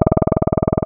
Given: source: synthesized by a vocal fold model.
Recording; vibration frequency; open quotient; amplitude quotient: sustained vowel; 20 Hz; 0.1; 1.4